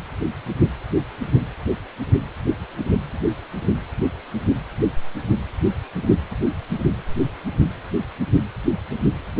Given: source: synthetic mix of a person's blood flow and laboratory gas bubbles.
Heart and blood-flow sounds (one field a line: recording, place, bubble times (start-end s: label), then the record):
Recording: Doppler ultrasound of blood flow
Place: precordium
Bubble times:
no bubbles
From the record:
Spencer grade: 0 (complete lack of bubble signals)